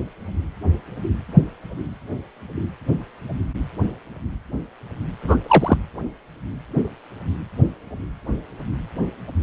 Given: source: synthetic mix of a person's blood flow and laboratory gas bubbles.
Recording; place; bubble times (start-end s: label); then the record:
Doppler ultrasound of blood flow; precordium
5.21-5.37 s: bubbles
5.47-5.77 s: bubbles
From the record:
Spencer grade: 1 (occasional bubble signal discernible with the cardiac motion signal, with majority of cardiac periods free of bubbles); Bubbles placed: anywhere in the cardiac cycle